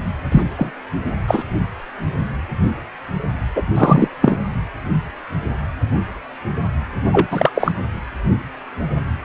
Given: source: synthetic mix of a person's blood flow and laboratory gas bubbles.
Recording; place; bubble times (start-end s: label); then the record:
Doppler ultrasound of blood flow; precordium
0.31-0.43 s: bubbles
0.57-0.72 s: bubbles
1.27-1.43 s: bubbles
3.55-3.62 s: bubbles
3.75-4.08 s: bubbles
4.21-4.38 s: bubbles
7.12-7.28 s: bubbles
7.31-7.50 s: bubbles
7.54-7.72 s: bubbles
From the record:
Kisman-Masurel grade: 223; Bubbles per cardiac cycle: several, 3 to 8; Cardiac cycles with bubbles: 10 to 50%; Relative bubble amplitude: loud (0.450 to 0.775); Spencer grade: 2 (many but less than half of the cardiac periods contain bubble signals, singularly or in groups); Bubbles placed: anywhere in the cardiac cycle